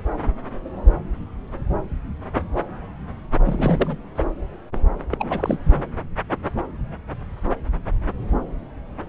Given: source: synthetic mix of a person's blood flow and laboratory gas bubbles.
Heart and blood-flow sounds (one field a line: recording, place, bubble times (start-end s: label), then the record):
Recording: Doppler ultrasound of blood flow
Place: subclavian vein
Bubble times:
3.45-3.96 s: bubbles
4.15-4.24 s: bubbles
5.11-5.61 s: bubbles
5.64-5.83 s: bubbles
From the record:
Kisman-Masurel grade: 222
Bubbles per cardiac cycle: several, 3 to 8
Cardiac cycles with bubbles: 10 to 50%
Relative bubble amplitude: moderate (0.250 to 0.450)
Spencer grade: 2 (many but less than half of the cardiac periods contain bubble signals, singularly or in groups)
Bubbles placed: anywhere in the cardiac cycle